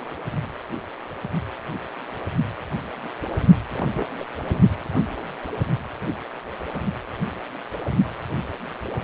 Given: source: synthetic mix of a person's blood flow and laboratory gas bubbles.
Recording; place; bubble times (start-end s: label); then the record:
Doppler ultrasound of blood flow; precordium
3.73-4.07 s: bubbles
4.19-4.28 s: bubbles
4.50-4.60 s: bubbles
From the record:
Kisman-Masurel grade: 211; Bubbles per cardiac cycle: several, 3 to 8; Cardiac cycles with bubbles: 1 to 10%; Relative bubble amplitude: barely perceptible (0.100 to 0.250); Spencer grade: 1 (occasional bubble signal discernible with the cardiac motion signal, with majority of cardiac periods free of bubbles); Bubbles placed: only in the low amplitude regions of the cardiac cycle